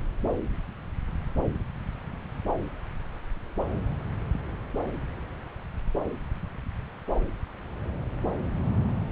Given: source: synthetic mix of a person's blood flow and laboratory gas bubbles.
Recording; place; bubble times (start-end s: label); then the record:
Doppler ultrasound of blood flow; subclavian vein
no bubbles
From the record:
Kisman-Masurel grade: 000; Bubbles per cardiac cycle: 0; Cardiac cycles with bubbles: 0%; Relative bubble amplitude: no bubbles discernible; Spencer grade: 0 (complete lack of bubble signals)